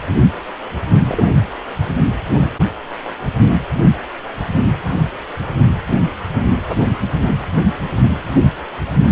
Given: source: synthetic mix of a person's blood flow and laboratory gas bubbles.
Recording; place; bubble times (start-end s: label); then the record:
Doppler ultrasound of blood flow; precordium
1.07-1.29 s: bubbles
From the record:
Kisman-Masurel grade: 112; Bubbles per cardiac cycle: 1 to 2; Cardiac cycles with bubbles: 1 to 10%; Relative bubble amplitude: moderate (0.250 to 0.450); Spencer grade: 1 (occasional bubble signal discernible with the cardiac motion signal, with majority of cardiac periods free of bubbles); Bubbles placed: only in the low amplitude regions of the cardiac cycle